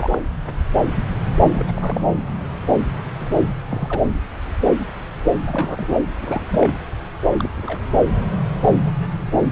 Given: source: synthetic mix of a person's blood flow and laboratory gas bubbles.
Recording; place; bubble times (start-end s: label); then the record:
Doppler ultrasound of blood flow; subclavian vein
0.00-0.23 s: bubbles
1.54-1.65 s: bubbles
1.68-1.72 s: bubbles
1.76-2.02 s: bubbles
3.19-3.25 s: bubbles
3.68-4.01 s: bubbles
5.48-5.96 s: bubbles
6.19-6.46 s: bubbles
6.52-6.74 s: bubbles
7.38-7.51 s: bubbles
7.58-7.81 s: bubbles
From the record:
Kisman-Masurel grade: 221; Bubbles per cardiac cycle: several, 3 to 8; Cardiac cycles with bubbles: 10 to 50%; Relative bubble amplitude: barely perceptible (0.100 to 0.250); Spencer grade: 2 (many but less than half of the cardiac periods contain bubble signals, singularly or in groups); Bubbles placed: anywhere in the cardiac cycle